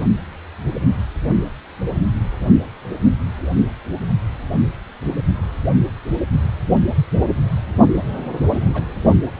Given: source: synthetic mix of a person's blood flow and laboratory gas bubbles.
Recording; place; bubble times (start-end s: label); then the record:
Doppler ultrasound of blood flow; precordium
8.03-8.32 s: bubbles
8.48-8.66 s: bubbles
8.73-8.84 s: bubbles
From the record:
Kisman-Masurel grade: 221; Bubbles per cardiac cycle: several, 3 to 8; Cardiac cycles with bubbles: 10 to 50%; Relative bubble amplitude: barely perceptible (0.100 to 0.250); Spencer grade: 2 (many but less than half of the cardiac periods contain bubble signals, singularly or in groups); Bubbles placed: only in the low amplitude regions of the cardiac cycle